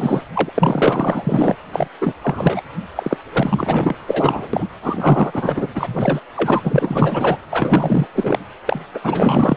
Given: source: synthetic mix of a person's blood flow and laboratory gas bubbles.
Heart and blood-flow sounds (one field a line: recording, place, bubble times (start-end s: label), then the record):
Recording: Doppler ultrasound of blood flow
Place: precordium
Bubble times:
0.00-0.22 s: bubbles
0.35-1.56 s: bubbles
1.73-1.89 s: bubbles
2.01-2.13 s: bubbles
2.22-2.62 s: bubbles
2.95-3.17 s: bubbles
3.33-3.95 s: bubbles
4.07-4.49 s: bubbles
4.53-4.67 s: bubbles
4.82-5.68 s: bubbles
5.75-6.21 s: bubbles
6.36-7.37 s: bubbles
7.50-8.07 s: bubbles
8.14-8.41 s: bubbles
8.65-8.79 s: bubbles
8.93-8.99 s: bubbles
9.03-9.57 s: bubbles
From the record:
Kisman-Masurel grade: 444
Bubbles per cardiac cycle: continuous sound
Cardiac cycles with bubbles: 100%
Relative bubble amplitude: maximal (0.775 to 0.999)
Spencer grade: 4 (maximum detectable bubble signal sounding continuously throughout systole and diastole of every cardiac period, and overriding the amplitude of the normal cardiac signals)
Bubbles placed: anywhere in the cardiac cycle